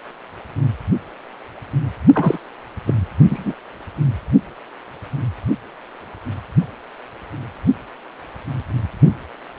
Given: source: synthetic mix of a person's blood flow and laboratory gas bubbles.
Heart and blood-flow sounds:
Doppler ultrasound of blood flow; precordium
2.14-2.39 s: bubbles
2.87-2.94 s: bubbles
3.30-3.54 s: bubbles
From the record:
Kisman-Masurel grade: 223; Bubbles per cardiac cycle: several, 3 to 8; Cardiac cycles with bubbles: 10 to 50%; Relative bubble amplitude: loud (0.450 to 0.775); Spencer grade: 2 (many but less than half of the cardiac periods contain bubble signals, singularly or in groups); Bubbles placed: only in the low amplitude regions of the cardiac cycle

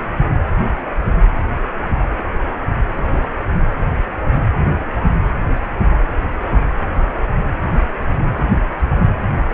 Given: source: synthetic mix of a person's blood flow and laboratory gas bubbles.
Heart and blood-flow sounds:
Doppler ultrasound of blood flow; precordium
2.96-3.28 s: bubbles
From the record:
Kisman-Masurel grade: 111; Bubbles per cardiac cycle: 1 to 2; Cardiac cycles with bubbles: 1 to 10%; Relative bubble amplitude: barely perceptible (0.100 to 0.250); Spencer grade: 1 (occasional bubble signal discernible with the cardiac motion signal, with majority of cardiac periods free of bubbles); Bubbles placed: anywhere in the cardiac cycle

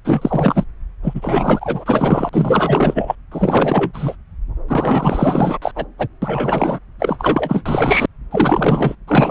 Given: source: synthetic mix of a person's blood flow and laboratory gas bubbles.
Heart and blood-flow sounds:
Doppler ultrasound of blood flow; subclavian vein
0.05-0.64 s: bubbles
1.03-2.29 s: bubbles
2.32-3.15 s: bubbles
3.31-4.16 s: bubbles
4.68-5.58 s: bubbles
5.62-5.71 s: bubbles
5.75-5.85 s: bubbles
5.98-6.08 s: bubbles
6.22-6.79 s: bubbles
6.99-8.05 s: bubbles
8.31-8.96 s: bubbles
9.07-9.31 s: bubbles
From the record:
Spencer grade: 4 (maximum detectable bubble signal sounding continuously throughout systole and diastole of every cardiac period, and overriding the amplitude of the normal cardiac signals); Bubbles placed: anywhere in the cardiac cycle

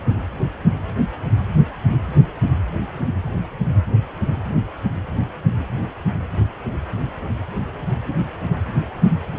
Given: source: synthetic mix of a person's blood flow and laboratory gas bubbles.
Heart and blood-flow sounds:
Doppler ultrasound of blood flow; precordium
no bubbles
From the record:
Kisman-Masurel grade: 000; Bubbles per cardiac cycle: 0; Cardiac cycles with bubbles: 0%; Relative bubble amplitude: no bubbles discernible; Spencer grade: 0 (complete lack of bubble signals)

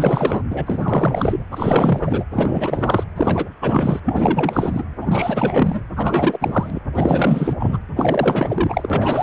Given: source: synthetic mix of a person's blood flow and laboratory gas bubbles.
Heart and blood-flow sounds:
Doppler ultrasound of blood flow; precordium
0.00-0.43 s: bubbles
0.50-1.38 s: bubbles
1.51-2.24 s: bubbles
2.31-3.04 s: bubbles
3.16-3.49 s: bubbles
3.61-4.00 s: bubbles
4.05-4.83 s: bubbles
5.00-5.81 s: bubbles
5.96-6.79 s: bubbles
6.95-7.54 s: bubbles
7.59-7.79 s: bubbles
7.96-9.23 s: bubbles
From the record:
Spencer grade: 4 (maximum detectable bubble signal sounding continuously throughout systole and diastole of every cardiac period, and overriding the amplitude of the normal cardiac signals); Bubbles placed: anywhere in the cardiac cycle

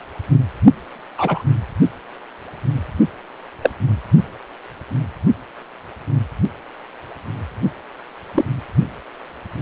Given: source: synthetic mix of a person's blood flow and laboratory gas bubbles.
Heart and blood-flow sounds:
Doppler ultrasound of blood flow; precordium
1.18-1.43 s: bubbles
3.61-3.70 s: bubbles
8.34-8.45 s: bubbles
From the record:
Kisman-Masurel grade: 123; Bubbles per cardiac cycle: 1 to 2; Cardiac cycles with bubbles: 10 to 50%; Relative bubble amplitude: loud (0.450 to 0.775); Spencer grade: 2 (many but less than half of the cardiac periods contain bubble signals, singularly or in groups); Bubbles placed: only in the low amplitude regions of the cardiac cycle

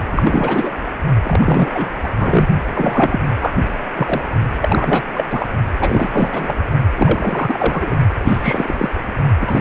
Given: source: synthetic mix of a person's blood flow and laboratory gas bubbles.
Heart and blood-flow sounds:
Doppler ultrasound of blood flow; precordium
0.12-0.79 s: bubbles
1.23-1.91 s: bubbles
2.03-2.08 s: bubbles
2.19-2.48 s: bubbles
2.73-3.20 s: bubbles
3.40-3.55 s: bubbles
3.96-4.23 s: bubbles
4.61-5.02 s: bubbles
5.14-5.25 s: bubbles
5.30-5.47 s: bubbles
5.77-6.54 s: bubbles
6.97-7.96 s: bubbles
8.23-8.89 s: bubbles
9.40-9.61 s: bubbles
From the record:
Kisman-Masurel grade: 343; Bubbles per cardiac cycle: rolling drumbeat, 9 or more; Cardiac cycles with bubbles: 100%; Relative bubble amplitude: loud (0.450 to 0.775); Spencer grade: 3 (all of the cardiac periods contain showers or single bubble signals, but not dominating or overriding the cardiac motion signals); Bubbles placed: only in the low amplitude regions of the cardiac cycle

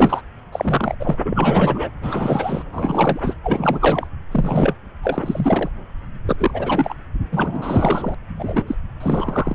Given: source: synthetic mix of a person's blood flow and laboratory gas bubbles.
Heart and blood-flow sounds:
Doppler ultrasound of blood flow; subclavian vein
0.00-0.22 s: bubbles
0.52-0.95 s: bubbles
0.99-1.16 s: bubbles
1.25-1.90 s: bubbles
2.02-2.63 s: bubbles
2.72-3.35 s: bubbles
3.43-4.07 s: bubbles
4.31-4.75 s: bubbles
5.03-5.69 s: bubbles
6.25-6.95 s: bubbles
7.31-8.14 s: bubbles
8.39-8.63 s: bubbles
8.66-8.75 s: bubbles
9.00-9.55 s: bubbles
From the record:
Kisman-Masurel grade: 343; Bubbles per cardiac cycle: rolling drumbeat, 9 or more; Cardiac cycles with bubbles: 100%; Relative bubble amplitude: loud (0.450 to 0.775); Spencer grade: 3 (all of the cardiac periods contain showers or single bubble signals, but not dominating or overriding the cardiac motion signals); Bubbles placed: anywhere in the cardiac cycle

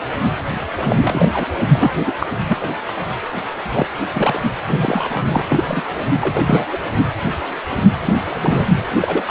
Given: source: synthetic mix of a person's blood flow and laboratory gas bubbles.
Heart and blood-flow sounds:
Doppler ultrasound of blood flow; precordium
0.82-0.97 s: bubbles
1.01-1.47 s: bubbles
1.66-1.93 s: bubbles
1.96-2.12 s: bubbles
2.20-2.27 s: bubbles
2.49-2.58 s: bubbles
2.60-2.70 s: bubbles
2.88-2.92 s: bubbles
3.74-3.86 s: bubbles
4.15-4.40 s: bubbles
4.67-5.42 s: bubbles
5.50-5.85 s: bubbles
5.99-6.07 s: bubbles
6.21-6.65 s: bubbles
6.71-6.79 s: bubbles
8.05-8.14 s: bubbles
8.30-8.63 s: bubbles
9.00-9.22 s: bubbles
9.26-9.31 s: bubbles
From the record:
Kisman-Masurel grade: 232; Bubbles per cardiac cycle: several, 3 to 8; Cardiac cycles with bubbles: 50 to 99%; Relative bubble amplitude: moderate (0.250 to 0.450); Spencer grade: 3 (all of the cardiac periods contain showers or single bubble signals, but not dominating or overriding the cardiac motion signals); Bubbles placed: anywhere in the cardiac cycle

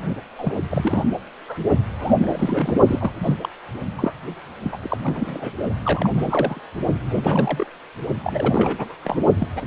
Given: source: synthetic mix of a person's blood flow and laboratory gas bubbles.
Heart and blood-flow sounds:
Doppler ultrasound of blood flow; precordium
0.38-0.52 s: bubbles
0.54-0.59 s: bubbles
0.70-1.04 s: bubbles
1.48-1.59 s: bubbles
1.99-2.76 s: bubbles
2.87-3.12 s: bubbles
3.23-3.36 s: bubbles
3.43-3.49 s: bubbles
3.98-4.13 s: bubbles
4.62-4.78 s: bubbles
4.82-4.97 s: bubbles
5.03-5.51 s: bubbles
5.83-6.10 s: bubbles
6.14-6.61 s: bubbles
7.09-7.67 s: bubbles
8.24-8.95 s: bubbles
9.04-9.24 s: bubbles
9.38-9.47 s: bubbles
9.55-9.62 s: bubbles
From the record:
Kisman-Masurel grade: 342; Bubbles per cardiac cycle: rolling drumbeat, 9 or more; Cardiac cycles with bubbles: 100%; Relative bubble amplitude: moderate (0.250 to 0.450); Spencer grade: 3 (all of the cardiac periods contain showers or single bubble signals, but not dominating or overriding the cardiac motion signals); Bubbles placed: only in the low amplitude regions of the cardiac cycle

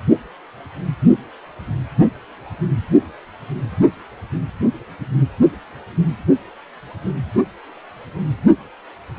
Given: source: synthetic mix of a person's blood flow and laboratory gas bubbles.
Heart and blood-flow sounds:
Doppler ultrasound of blood flow; precordium
no bubbles
From the record:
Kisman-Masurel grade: 000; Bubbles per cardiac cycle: 0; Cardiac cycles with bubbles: 0%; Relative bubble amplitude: no bubbles discernible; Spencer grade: 0 (complete lack of bubble signals)

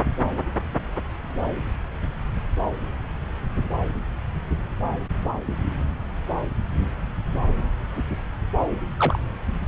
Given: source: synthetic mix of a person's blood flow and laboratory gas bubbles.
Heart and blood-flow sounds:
Doppler ultrasound of blood flow; subclavian vein
8.99-9.19 s: bubbles
From the record:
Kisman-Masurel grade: 112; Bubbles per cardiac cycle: 1 to 2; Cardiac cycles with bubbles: 1 to 10%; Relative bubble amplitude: moderate (0.250 to 0.450); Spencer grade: 1 (occasional bubble signal discernible with the cardiac motion signal, with majority of cardiac periods free of bubbles); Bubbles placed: anywhere in the cardiac cycle

